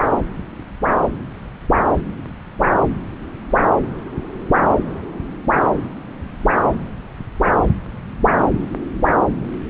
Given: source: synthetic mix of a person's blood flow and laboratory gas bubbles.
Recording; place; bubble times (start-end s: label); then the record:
Doppler ultrasound of blood flow; subclavian vein
no bubbles
From the record:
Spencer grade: 0 (complete lack of bubble signals)